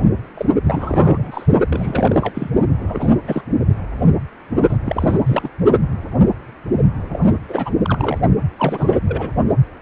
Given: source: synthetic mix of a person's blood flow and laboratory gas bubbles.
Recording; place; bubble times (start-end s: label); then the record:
Doppler ultrasound of blood flow; precordium
0.34-0.45 s: bubbles
0.64-1.46 s: bubbles
1.69-2.50 s: bubbles
2.79-3.10 s: bubbles
3.27-3.42 s: bubbles
4.69-4.77 s: bubbles
4.85-5.18 s: bubbles
5.26-5.49 s: bubbles
7.10-7.40 s: bubbles
7.48-7.71 s: bubbles
7.83-8.18 s: bubbles
8.58-8.88 s: bubbles
8.92-8.96 s: bubbles
9.08-9.30 s: bubbles
From the record:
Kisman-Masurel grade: 332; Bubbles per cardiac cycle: rolling drumbeat, 9 or more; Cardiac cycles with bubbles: 50 to 99%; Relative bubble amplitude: moderate (0.250 to 0.450); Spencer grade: 3 (all of the cardiac periods contain showers or single bubble signals, but not dominating or overriding the cardiac motion signals); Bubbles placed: only in the low amplitude regions of the cardiac cycle